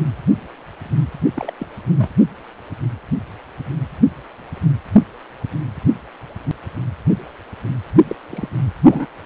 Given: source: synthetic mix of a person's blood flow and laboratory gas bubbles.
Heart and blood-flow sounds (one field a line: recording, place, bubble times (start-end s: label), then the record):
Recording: Doppler ultrasound of blood flow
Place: precordium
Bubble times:
1.35-1.53 s: bubbles
1.59-1.66 s: bubbles
1.97-2.10 s: bubbles
8.04-8.15 s: bubbles
8.30-8.48 s: bubbles
8.83-9.06 s: bubbles
From the record:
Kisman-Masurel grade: 222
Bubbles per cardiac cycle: several, 3 to 8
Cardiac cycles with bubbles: 10 to 50%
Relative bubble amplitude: moderate (0.250 to 0.450)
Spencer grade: 2 (many but less than half of the cardiac periods contain bubble signals, singularly or in groups)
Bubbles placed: only in the low amplitude regions of the cardiac cycle